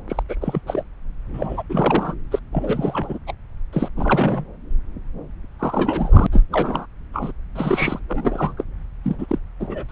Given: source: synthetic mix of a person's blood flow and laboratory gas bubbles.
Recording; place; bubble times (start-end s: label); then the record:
Doppler ultrasound of blood flow; subclavian vein
0.08-0.23 s: bubbles
0.29-0.35 s: bubbles
0.41-0.61 s: bubbles
0.66-0.83 s: bubbles
1.33-1.62 s: bubbles
1.69-2.16 s: bubbles
2.31-2.39 s: bubbles
2.52-3.18 s: bubbles
3.27-3.33 s: bubbles
3.73-3.89 s: bubbles
3.96-4.44 s: bubbles
5.59-6.26 s: bubbles
6.31-6.42 s: bubbles
6.52-6.86 s: bubbles
7.13-7.32 s: bubbles
7.55-8.00 s: bubbles
8.08-8.54 s: bubbles
8.57-8.64 s: bubbles
9.04-9.16 s: bubbles
9.18-9.38 s: bubbles
9.60-9.84 s: bubbles
9.88-9.92 s: bubbles
From the record:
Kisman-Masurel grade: 342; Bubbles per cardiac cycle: rolling drumbeat, 9 or more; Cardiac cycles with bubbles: 100%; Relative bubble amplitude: moderate (0.250 to 0.450); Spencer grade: 3 (all of the cardiac periods contain showers or single bubble signals, but not dominating or overriding the cardiac motion signals); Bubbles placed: anywhere in the cardiac cycle